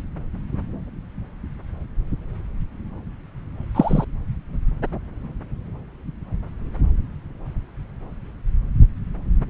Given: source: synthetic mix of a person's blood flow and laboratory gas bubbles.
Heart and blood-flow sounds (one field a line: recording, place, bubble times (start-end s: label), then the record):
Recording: Doppler ultrasound of blood flow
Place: subclavian vein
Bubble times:
3.75-4.04 s: bubbles
From the record:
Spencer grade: 1 (occasional bubble signal discernible with the cardiac motion signal, with majority of cardiac periods free of bubbles)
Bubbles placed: anywhere in the cardiac cycle